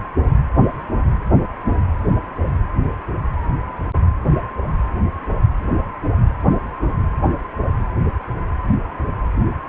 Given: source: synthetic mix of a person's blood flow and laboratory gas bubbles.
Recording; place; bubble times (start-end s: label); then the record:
Doppler ultrasound of blood flow; precordium
no bubbles
From the record:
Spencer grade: 0 (complete lack of bubble signals)